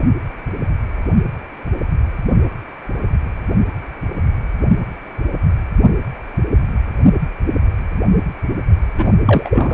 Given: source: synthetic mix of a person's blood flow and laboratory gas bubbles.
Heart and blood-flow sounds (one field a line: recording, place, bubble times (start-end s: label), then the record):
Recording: Doppler ultrasound of blood flow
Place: precordium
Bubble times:
8.97-9.12 s: bubbles
9.25-9.74 s: bubbles
From the record:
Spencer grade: 1 (occasional bubble signal discernible with the cardiac motion signal, with majority of cardiac periods free of bubbles)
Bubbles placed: only in the low amplitude regions of the cardiac cycle